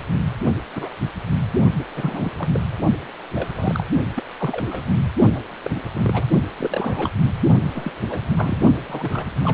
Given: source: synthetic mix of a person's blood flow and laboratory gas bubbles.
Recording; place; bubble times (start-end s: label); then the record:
Doppler ultrasound of blood flow; precordium
0.75-0.89 s: bubbles
1.77-1.85 s: bubbles
1.96-2.33 s: bubbles
2.38-2.48 s: bubbles
2.54-2.60 s: bubbles
3.35-3.84 s: bubbles
4.15-4.24 s: bubbles
4.38-4.92 s: bubbles
5.34-5.40 s: bubbles
5.62-5.71 s: bubbles
5.75-5.80 s: bubbles
5.95-6.26 s: bubbles
6.58-7.09 s: bubbles
7.75-7.91 s: bubbles
8.10-8.21 s: bubbles
8.37-8.64 s: bubbles
8.86-9.27 s: bubbles
9.43-9.54 s: bubbles
From the record:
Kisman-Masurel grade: 242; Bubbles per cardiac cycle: several, 3 to 8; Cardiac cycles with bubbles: 100%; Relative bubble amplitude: moderate (0.250 to 0.450); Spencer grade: 3 (all of the cardiac periods contain showers or single bubble signals, but not dominating or overriding the cardiac motion signals); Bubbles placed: only in the low amplitude regions of the cardiac cycle